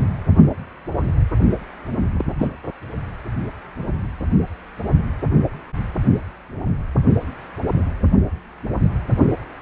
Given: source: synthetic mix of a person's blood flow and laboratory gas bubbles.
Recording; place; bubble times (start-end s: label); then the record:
Doppler ultrasound of blood flow; precordium
2.12-2.25 s: bubbles
2.38-2.48 s: bubbles
From the record:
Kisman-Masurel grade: 112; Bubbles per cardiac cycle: 1 to 2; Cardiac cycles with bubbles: 1 to 10%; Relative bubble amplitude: moderate (0.250 to 0.450); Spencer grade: 1 (occasional bubble signal discernible with the cardiac motion signal, with majority of cardiac periods free of bubbles); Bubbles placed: only in the low amplitude regions of the cardiac cycle